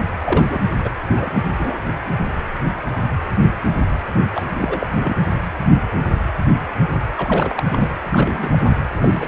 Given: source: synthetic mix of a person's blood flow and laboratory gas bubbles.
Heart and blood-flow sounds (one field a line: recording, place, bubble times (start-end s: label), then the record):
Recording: Doppler ultrasound of blood flow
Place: precordium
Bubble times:
0.04-0.07 s: bubbles
0.21-0.60 s: bubbles
0.83-0.93 s: bubbles
1.07-1.43 s: bubbles
1.50-1.83 s: bubbles
4.33-4.97 s: bubbles
5.00-5.18 s: bubbles
7.17-7.63 s: bubbles
7.66-7.89 s: bubbles
8.11-8.58 s: bubbles
8.62-8.68 s: bubbles
9.01-9.28 s: bubbles
From the record:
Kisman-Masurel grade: 332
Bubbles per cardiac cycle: rolling drumbeat, 9 or more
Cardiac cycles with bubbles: 50 to 99%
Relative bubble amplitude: moderate (0.250 to 0.450)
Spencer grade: 3 (all of the cardiac periods contain showers or single bubble signals, but not dominating or overriding the cardiac motion signals)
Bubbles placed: anywhere in the cardiac cycle